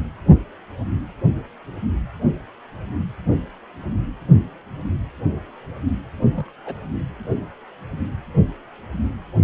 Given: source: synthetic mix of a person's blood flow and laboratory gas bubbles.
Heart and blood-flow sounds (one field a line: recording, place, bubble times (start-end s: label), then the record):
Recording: Doppler ultrasound of blood flow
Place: precordium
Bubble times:
6.37-6.49 s: bubbles
6.65-6.75 s: bubbles
From the record:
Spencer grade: 1 (occasional bubble signal discernible with the cardiac motion signal, with majority of cardiac periods free of bubbles)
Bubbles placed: anywhere in the cardiac cycle